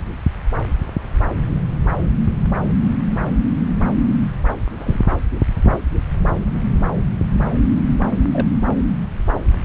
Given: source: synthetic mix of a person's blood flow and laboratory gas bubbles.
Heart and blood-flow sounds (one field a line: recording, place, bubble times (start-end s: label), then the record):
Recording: Doppler ultrasound of blood flow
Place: subclavian vein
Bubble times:
4.78-5.00 s: bubbles
8.33-8.47 s: bubbles
From the record:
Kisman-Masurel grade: 121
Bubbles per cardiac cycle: 1 to 2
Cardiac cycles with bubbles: 10 to 50%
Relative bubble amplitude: barely perceptible (0.100 to 0.250)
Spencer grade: 2 (many but less than half of the cardiac periods contain bubble signals, singularly or in groups)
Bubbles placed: anywhere in the cardiac cycle